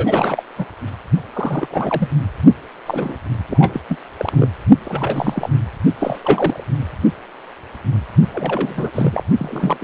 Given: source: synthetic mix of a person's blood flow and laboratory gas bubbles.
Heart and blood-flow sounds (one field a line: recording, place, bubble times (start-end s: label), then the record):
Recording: Doppler ultrasound of blood flow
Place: precordium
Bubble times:
0.00-0.42 s: bubbles
0.58-0.66 s: bubbles
1.33-2.08 s: bubbles
2.86-3.15 s: bubbles
3.49-3.81 s: bubbles
3.88-3.98 s: bubbles
4.18-4.48 s: bubbles
4.85-5.50 s: bubbles
5.99-6.65 s: bubbles
8.31-8.91 s: bubbles
8.93-9.23 s: bubbles
9.38-9.77 s: bubbles
9.81-9.84 s: bubbles
From the record:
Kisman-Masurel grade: 332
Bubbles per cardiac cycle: rolling drumbeat, 9 or more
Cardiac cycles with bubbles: 50 to 99%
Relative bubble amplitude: moderate (0.250 to 0.450)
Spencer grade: 3 (all of the cardiac periods contain showers or single bubble signals, but not dominating or overriding the cardiac motion signals)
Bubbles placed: only in the low amplitude regions of the cardiac cycle